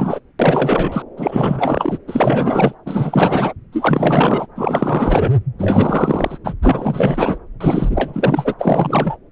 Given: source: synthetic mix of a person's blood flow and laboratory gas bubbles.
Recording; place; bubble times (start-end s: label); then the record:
Doppler ultrasound of blood flow; subclavian vein
0.00-0.20 s: bubbles
0.39-1.02 s: bubbles
1.17-1.98 s: bubbles
2.07-2.74 s: bubbles
2.85-3.53 s: bubbles
3.72-4.47 s: bubbles
4.56-5.32 s: bubbles
5.58-6.38 s: bubbles
6.44-6.54 s: bubbles
6.62-7.38 s: bubbles
7.60-8.54 s: bubbles
8.59-9.17 s: bubbles
From the record:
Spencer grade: 4 (maximum detectable bubble signal sounding continuously throughout systole and diastole of every cardiac period, and overriding the amplitude of the normal cardiac signals); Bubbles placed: anywhere in the cardiac cycle